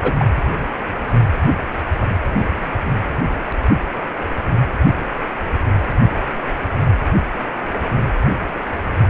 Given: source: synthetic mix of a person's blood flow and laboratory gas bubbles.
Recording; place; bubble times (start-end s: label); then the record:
Doppler ultrasound of blood flow; precordium
0.02-0.13 s: bubbles
0.18-0.26 s: bubbles
From the record:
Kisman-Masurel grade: 212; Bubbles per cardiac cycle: several, 3 to 8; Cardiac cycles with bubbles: 1 to 10%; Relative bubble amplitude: moderate (0.250 to 0.450); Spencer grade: 1 (occasional bubble signal discernible with the cardiac motion signal, with majority of cardiac periods free of bubbles); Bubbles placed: anywhere in the cardiac cycle